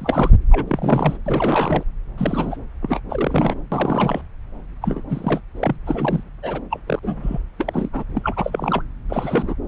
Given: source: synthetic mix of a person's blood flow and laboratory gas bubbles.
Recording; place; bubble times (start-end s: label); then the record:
Doppler ultrasound of blood flow; subclavian vein
0.00-0.36 s: bubbles
0.51-1.18 s: bubbles
1.25-1.83 s: bubbles
2.17-2.56 s: bubbles
2.82-3.00 s: bubbles
3.10-3.55 s: bubbles
3.71-4.22 s: bubbles
4.82-5.04 s: bubbles
5.09-5.40 s: bubbles
5.57-5.76 s: bubbles
5.86-6.24 s: bubbles
6.42-6.61 s: bubbles
6.71-6.79 s: bubbles
6.87-6.99 s: bubbles
7.03-7.39 s: bubbles
7.59-7.89 s: bubbles
7.93-8.04 s: bubbles
8.15-8.84 s: bubbles
9.10-9.54 s: bubbles
From the record:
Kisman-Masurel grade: 342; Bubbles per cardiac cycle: rolling drumbeat, 9 or more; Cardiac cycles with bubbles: 100%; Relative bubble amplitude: moderate (0.250 to 0.450); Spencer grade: 3 (all of the cardiac periods contain showers or single bubble signals, but not dominating or overriding the cardiac motion signals); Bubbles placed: anywhere in the cardiac cycle